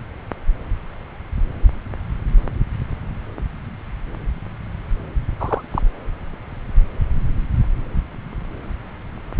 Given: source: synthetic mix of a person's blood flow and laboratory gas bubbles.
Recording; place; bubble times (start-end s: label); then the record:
Doppler ultrasound of blood flow; subclavian vein
5.40-5.62 s: bubbles
5.71-5.82 s: bubbles
From the record:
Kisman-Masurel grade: 212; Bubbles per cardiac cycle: several, 3 to 8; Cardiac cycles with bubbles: 1 to 10%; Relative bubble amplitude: moderate (0.250 to 0.450); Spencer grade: 1 (occasional bubble signal discernible with the cardiac motion signal, with majority of cardiac periods free of bubbles); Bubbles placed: anywhere in the cardiac cycle